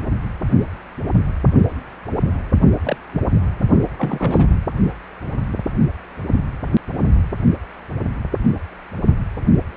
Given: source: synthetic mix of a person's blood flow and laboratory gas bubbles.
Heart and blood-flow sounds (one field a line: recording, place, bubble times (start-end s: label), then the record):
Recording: Doppler ultrasound of blood flow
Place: precordium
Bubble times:
2.84-2.96 s: bubbles
3.12-3.21 s: bubbles
3.97-4.47 s: bubbles
From the record:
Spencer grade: 2 (many but less than half of the cardiac periods contain bubble signals, singularly or in groups)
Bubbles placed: only in the low amplitude regions of the cardiac cycle